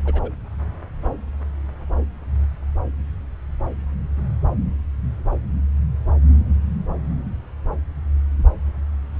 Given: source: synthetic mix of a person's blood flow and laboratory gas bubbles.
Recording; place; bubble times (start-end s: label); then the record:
Doppler ultrasound of blood flow; subclavian vein
0.05-0.29 s: bubbles
From the record:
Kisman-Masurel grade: 111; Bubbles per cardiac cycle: 1 to 2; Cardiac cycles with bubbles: 1 to 10%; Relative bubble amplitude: barely perceptible (0.100 to 0.250); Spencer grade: 1 (occasional bubble signal discernible with the cardiac motion signal, with majority of cardiac periods free of bubbles); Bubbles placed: anywhere in the cardiac cycle